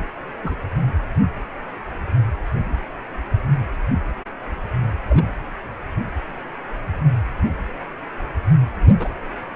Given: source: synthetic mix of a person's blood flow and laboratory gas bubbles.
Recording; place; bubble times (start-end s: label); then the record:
Doppler ultrasound of blood flow; precordium
0.43-0.57 s: bubbles
5.07-5.37 s: bubbles
8.99-9.14 s: bubbles
From the record:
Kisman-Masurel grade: 121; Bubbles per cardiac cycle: 1 to 2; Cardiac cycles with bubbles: 10 to 50%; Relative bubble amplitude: barely perceptible (0.100 to 0.250); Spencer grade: 2 (many but less than half of the cardiac periods contain bubble signals, singularly or in groups); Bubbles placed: anywhere in the cardiac cycle